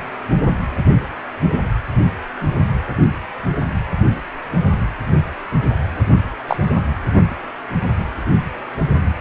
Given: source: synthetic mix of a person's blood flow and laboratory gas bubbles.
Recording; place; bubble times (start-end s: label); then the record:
Doppler ultrasound of blood flow; precordium
6.48-6.57 s: bubbles
From the record:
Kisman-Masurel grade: 112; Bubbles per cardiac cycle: 1 to 2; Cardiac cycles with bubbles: 1 to 10%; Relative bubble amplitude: moderate (0.250 to 0.450); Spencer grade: 1 (occasional bubble signal discernible with the cardiac motion signal, with majority of cardiac periods free of bubbles); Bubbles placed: anywhere in the cardiac cycle